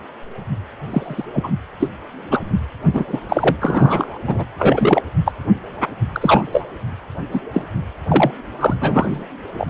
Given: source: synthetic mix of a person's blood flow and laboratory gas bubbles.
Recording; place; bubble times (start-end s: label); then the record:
Doppler ultrasound of blood flow; precordium
0.89-1.25 s: bubbles
1.33-1.51 s: bubbles
1.80-1.89 s: bubbles
2.29-2.41 s: bubbles
2.93-3.04 s: bubbles
3.07-3.21 s: bubbles
3.29-3.56 s: bubbles
3.62-4.18 s: bubbles
4.27-4.44 s: bubbles
4.58-5.02 s: bubbles
5.25-5.32 s: bubbles
6.12-6.63 s: bubbles
7.32-7.41 s: bubbles
7.53-7.61 s: bubbles
8.08-8.32 s: bubbles
8.60-8.75 s: bubbles
8.82-9.26 s: bubbles
9.54-9.70 s: bubbles
From the record:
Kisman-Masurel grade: 243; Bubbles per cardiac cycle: several, 3 to 8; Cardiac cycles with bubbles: 100%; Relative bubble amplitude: loud (0.450 to 0.775); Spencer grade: 3 (all of the cardiac periods contain showers or single bubble signals, but not dominating or overriding the cardiac motion signals); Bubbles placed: anywhere in the cardiac cycle